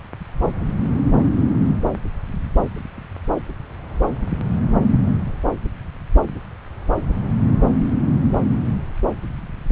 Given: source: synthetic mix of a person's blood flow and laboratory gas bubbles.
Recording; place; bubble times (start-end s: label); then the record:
Doppler ultrasound of blood flow; subclavian vein
no bubbles
From the record:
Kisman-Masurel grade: 000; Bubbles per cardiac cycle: 0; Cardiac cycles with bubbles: 0%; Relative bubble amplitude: no bubbles discernible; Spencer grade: 0 (complete lack of bubble signals)